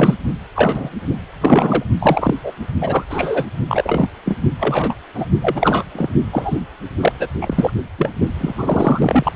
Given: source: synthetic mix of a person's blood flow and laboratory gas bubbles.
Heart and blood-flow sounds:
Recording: Doppler ultrasound of blood flow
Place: precordium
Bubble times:
0.00-0.14 s: bubbles
0.55-0.90 s: bubbles
1.40-1.84 s: bubbles
1.99-2.35 s: bubbles
2.44-2.52 s: bubbles
2.80-3.04 s: bubbles
3.10-3.44 s: bubbles
3.69-4.08 s: bubbles
4.25-4.38 s: bubbles
4.60-4.94 s: bubbles
5.14-5.25 s: bubbles
5.42-5.83 s: bubbles
5.95-6.10 s: bubbles
6.32-6.59 s: bubbles
7.00-7.12 s: bubbles
7.19-7.27 s: bubbles
7.41-7.71 s: bubbles
7.98-8.11 s: bubbles
8.40-9.32 s: bubbles
From the record:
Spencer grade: 3 (all of the cardiac periods contain showers or single bubble signals, but not dominating or overriding the cardiac motion signals)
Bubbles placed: only in the low amplitude regions of the cardiac cycle

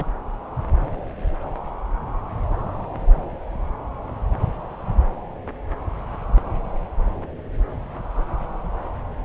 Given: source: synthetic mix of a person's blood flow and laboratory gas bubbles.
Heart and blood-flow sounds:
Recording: Doppler ultrasound of blood flow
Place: subclavian vein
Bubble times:
0.00-0.06 s: bubbles
From the record:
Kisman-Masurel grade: 212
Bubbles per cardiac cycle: several, 3 to 8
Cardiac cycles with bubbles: 1 to 10%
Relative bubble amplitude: moderate (0.250 to 0.450)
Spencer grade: 1 (occasional bubble signal discernible with the cardiac motion signal, with majority of cardiac periods free of bubbles)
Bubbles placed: anywhere in the cardiac cycle

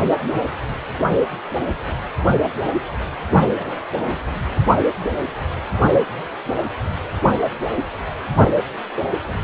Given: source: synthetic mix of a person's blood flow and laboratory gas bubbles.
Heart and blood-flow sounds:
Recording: Doppler ultrasound of blood flow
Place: precordium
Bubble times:
3.56-3.79 s: bubbles
4.05-4.18 s: bubbles
From the record:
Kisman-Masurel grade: 111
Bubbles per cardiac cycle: 1 to 2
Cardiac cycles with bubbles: 1 to 10%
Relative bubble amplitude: barely perceptible (0.100 to 0.250)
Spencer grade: 1 (occasional bubble signal discernible with the cardiac motion signal, with majority of cardiac periods free of bubbles)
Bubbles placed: anywhere in the cardiac cycle

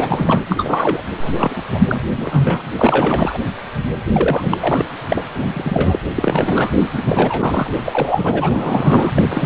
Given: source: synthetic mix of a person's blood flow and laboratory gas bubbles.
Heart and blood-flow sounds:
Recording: Doppler ultrasound of blood flow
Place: precordium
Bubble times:
0.00-0.42 s: bubbles
0.48-1.02 s: bubbles
1.22-1.33 s: bubbles
1.36-1.62 s: bubbles
1.72-1.80 s: bubbles
1.88-1.99 s: bubbles
2.17-2.62 s: bubbles
2.77-3.38 s: bubbles
4.12-4.57 s: bubbles
4.60-4.85 s: bubbles
5.08-5.22 s: bubbles
5.34-5.49 s: bubbles
5.54-5.96 s: bubbles
6.14-6.69 s: bubbles
6.93-7.03 s: bubbles
7.05-7.72 s: bubbles
7.75-9.23 s: bubbles
9.29-9.46 s: bubbles
From the record:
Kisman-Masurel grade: 342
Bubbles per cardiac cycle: rolling drumbeat, 9 or more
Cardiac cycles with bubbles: 100%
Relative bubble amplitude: moderate (0.250 to 0.450)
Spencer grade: 3 (all of the cardiac periods contain showers or single bubble signals, but not dominating or overriding the cardiac motion signals)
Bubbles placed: anywhere in the cardiac cycle

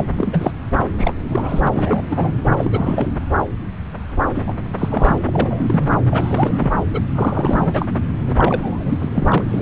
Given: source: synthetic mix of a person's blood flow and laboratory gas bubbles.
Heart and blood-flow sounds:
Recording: Doppler ultrasound of blood flow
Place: subclavian vein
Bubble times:
0.00-0.05 s: bubbles
0.17-0.53 s: bubbles
0.97-1.13 s: bubbles
1.24-1.68 s: bubbles
1.73-2.03 s: bubbles
2.10-2.40 s: bubbles
2.56-3.08 s: bubbles
4.34-4.53 s: bubbles
4.78-5.18 s: bubbles
5.25-5.96 s: bubbles
6.10-6.72 s: bubbles
6.92-7.00 s: bubbles
7.14-7.86 s: bubbles
8.28-8.98 s: bubbles
9.02-9.43 s: bubbles
9.49-9.62 s: bubbles
From the record:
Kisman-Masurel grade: 332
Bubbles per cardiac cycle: rolling drumbeat, 9 or more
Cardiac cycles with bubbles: 50 to 99%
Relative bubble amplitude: moderate (0.250 to 0.450)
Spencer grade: 3 (all of the cardiac periods contain showers or single bubble signals, but not dominating or overriding the cardiac motion signals)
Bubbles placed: anywhere in the cardiac cycle

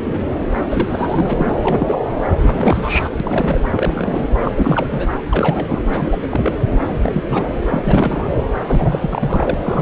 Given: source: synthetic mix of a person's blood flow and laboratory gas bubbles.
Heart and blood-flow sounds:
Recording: Doppler ultrasound of blood flow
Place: subclavian vein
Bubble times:
0.00-0.03 s: bubbles
0.05-0.20 s: bubbles
0.69-1.54 s: bubbles
1.63-1.97 s: bubbles
2.42-3.09 s: bubbles
3.20-3.61 s: bubbles
3.74-4.28 s: bubbles
4.45-4.52 s: bubbles
4.56-5.07 s: bubbles
5.25-5.83 s: bubbles
5.91-6.17 s: bubbles
6.21-6.53 s: bubbles
6.84-7.23 s: bubbles
7.28-7.54 s: bubbles
7.71-8.34 s: bubbles
8.67-9.54 s: bubbles
9.58-9.81 s: bubbles
From the record:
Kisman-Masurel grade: 342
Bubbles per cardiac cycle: rolling drumbeat, 9 or more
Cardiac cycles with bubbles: 100%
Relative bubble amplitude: moderate (0.250 to 0.450)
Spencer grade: 3 (all of the cardiac periods contain showers or single bubble signals, but not dominating or overriding the cardiac motion signals)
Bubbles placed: anywhere in the cardiac cycle

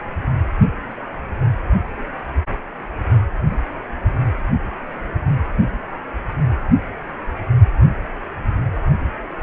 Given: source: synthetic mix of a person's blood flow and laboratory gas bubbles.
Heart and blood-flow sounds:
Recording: Doppler ultrasound of blood flow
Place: precordium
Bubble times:
3.50-3.56 s: bubbles
From the record:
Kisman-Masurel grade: 111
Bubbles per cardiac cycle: 1 to 2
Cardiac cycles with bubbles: 1 to 10%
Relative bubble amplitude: barely perceptible (0.100 to 0.250)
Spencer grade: 1 (occasional bubble signal discernible with the cardiac motion signal, with majority of cardiac periods free of bubbles)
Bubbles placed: anywhere in the cardiac cycle

